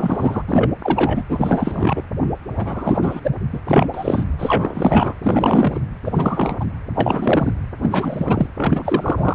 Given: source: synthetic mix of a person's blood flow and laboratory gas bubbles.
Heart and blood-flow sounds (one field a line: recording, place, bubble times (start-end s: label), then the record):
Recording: Doppler ultrasound of blood flow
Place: precordium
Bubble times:
0.00-0.42 s: bubbles
0.48-0.70 s: bubbles
0.81-1.23 s: bubbles
1.28-2.02 s: bubbles
2.56-3.21 s: bubbles
3.23-3.31 s: bubbles
3.52-3.59 s: bubbles
3.66-3.87 s: bubbles
3.94-4.25 s: bubbles
4.38-5.14 s: bubbles
5.23-5.80 s: bubbles
6.05-6.65 s: bubbles
6.95-7.53 s: bubbles
7.82-8.47 s: bubbles
8.57-9.35 s: bubbles
From the record:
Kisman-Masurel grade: 343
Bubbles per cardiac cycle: rolling drumbeat, 9 or more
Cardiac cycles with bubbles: 100%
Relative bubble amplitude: loud (0.450 to 0.775)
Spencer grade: 3 (all of the cardiac periods contain showers or single bubble signals, but not dominating or overriding the cardiac motion signals)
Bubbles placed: anywhere in the cardiac cycle